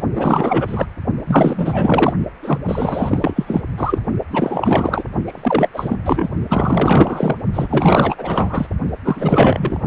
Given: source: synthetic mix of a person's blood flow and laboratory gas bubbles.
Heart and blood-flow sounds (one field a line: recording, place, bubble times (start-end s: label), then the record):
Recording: Doppler ultrasound of blood flow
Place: precordium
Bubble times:
0.15-0.86 s: bubbles
1.26-2.13 s: bubbles
2.43-2.59 s: bubbles
2.65-3.61 s: bubbles
3.77-3.99 s: bubbles
4.30-5.04 s: bubbles
5.25-5.69 s: bubbles
5.74-5.97 s: bubbles
6.04-6.29 s: bubbles
6.49-7.38 s: bubbles
7.54-8.15 s: bubbles
8.18-8.67 s: bubbles
9.04-9.79 s: bubbles
From the record:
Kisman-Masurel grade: 444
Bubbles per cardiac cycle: continuous sound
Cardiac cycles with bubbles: 100%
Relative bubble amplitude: maximal (0.775 to 0.999)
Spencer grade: 4 (maximum detectable bubble signal sounding continuously throughout systole and diastole of every cardiac period, and overriding the amplitude of the normal cardiac signals)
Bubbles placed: only in the low amplitude regions of the cardiac cycle